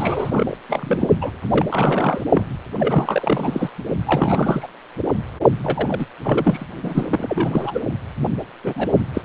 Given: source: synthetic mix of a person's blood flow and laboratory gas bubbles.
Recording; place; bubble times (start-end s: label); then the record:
Doppler ultrasound of blood flow; precordium
0.00-0.57 s: bubbles
0.69-1.07 s: bubbles
1.21-1.30 s: bubbles
1.50-1.66 s: bubbles
1.71-2.24 s: bubbles
2.31-2.44 s: bubbles
2.79-3.69 s: bubbles
4.04-4.67 s: bubbles
5.63-6.06 s: bubbles
6.23-6.66 s: bubbles
6.83-7.80 s: bubbles
8.64-8.90 s: bubbles
9.14-9.21 s: bubbles
From the record:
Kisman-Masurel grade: 332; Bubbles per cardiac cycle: rolling drumbeat, 9 or more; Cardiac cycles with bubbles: 50 to 99%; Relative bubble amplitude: moderate (0.250 to 0.450); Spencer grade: 3 (all of the cardiac periods contain showers or single bubble signals, but not dominating or overriding the cardiac motion signals); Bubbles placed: only in the low amplitude regions of the cardiac cycle